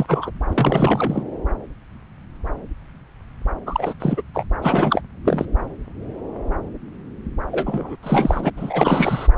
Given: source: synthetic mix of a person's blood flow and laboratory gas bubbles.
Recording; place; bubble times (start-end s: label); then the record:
Doppler ultrasound of blood flow; subclavian vein
0.00-0.30 s: bubbles
0.48-1.24 s: bubbles
3.66-3.93 s: bubbles
4.00-4.22 s: bubbles
4.33-4.46 s: bubbles
4.62-5.01 s: bubbles
5.25-5.46 s: bubbles
7.51-7.95 s: bubbles
8.02-8.50 s: bubbles
8.56-9.28 s: bubbles
From the record:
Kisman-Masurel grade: 333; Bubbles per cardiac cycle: rolling drumbeat, 9 or more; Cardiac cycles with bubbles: 50 to 99%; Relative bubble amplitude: loud (0.450 to 0.775); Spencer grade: 3 (all of the cardiac periods contain showers or single bubble signals, but not dominating or overriding the cardiac motion signals); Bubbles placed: anywhere in the cardiac cycle